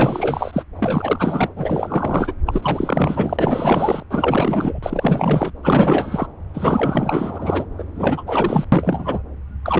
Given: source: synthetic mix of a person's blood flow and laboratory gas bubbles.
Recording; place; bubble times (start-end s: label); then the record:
Doppler ultrasound of blood flow; subclavian vein
0.00-0.65 s: bubbles
0.76-1.49 s: bubbles
1.56-2.33 s: bubbles
2.46-4.03 s: bubbles
4.11-4.79 s: bubbles
4.83-5.52 s: bubbles
5.63-6.28 s: bubbles
6.54-7.66 s: bubbles
7.78-7.84 s: bubbles
7.95-8.23 s: bubbles
8.26-8.64 s: bubbles
8.72-9.22 s: bubbles
9.63-9.79 s: bubbles
From the record:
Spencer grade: 4 (maximum detectable bubble signal sounding continuously throughout systole and diastole of every cardiac period, and overriding the amplitude of the normal cardiac signals); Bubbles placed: anywhere in the cardiac cycle